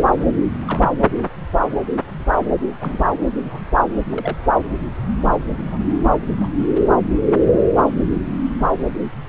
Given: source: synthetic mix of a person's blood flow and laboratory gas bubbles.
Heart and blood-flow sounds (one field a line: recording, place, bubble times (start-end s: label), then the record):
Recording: Doppler ultrasound of blood flow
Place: subclavian vein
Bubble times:
0.65-0.88 s: bubbles
2.79-3.10 s: bubbles
3.44-3.61 s: bubbles
4.11-4.36 s: bubbles
5.70-5.96 s: bubbles
6.37-6.48 s: bubbles
7.74-7.85 s: bubbles
8.09-8.16 s: bubbles
From the record:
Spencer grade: 2 (many but less than half of the cardiac periods contain bubble signals, singularly or in groups)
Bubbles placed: anywhere in the cardiac cycle